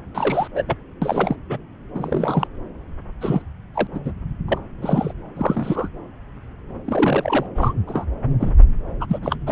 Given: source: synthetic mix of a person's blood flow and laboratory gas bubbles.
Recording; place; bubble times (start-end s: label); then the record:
Doppler ultrasound of blood flow; subclavian vein
0.15-0.48 s: bubbles
0.55-0.63 s: bubbles
0.66-0.77 s: bubbles
1.02-1.36 s: bubbles
1.50-1.58 s: bubbles
1.95-2.47 s: bubbles
3.21-3.42 s: bubbles
3.74-3.87 s: bubbles
3.93-4.00 s: bubbles
4.04-4.11 s: bubbles
4.48-4.58 s: bubbles
4.81-5.13 s: bubbles
5.36-5.88 s: bubbles
6.84-7.46 s: bubbles
7.55-7.73 s: bubbles
7.87-8.05 s: bubbles
8.40-8.53 s: bubbles
9.00-9.20 s: bubbles
9.22-9.36 s: bubbles
9.46-9.52 s: bubbles
From the record:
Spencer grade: 3 (all of the cardiac periods contain showers or single bubble signals, but not dominating or overriding the cardiac motion signals); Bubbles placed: anywhere in the cardiac cycle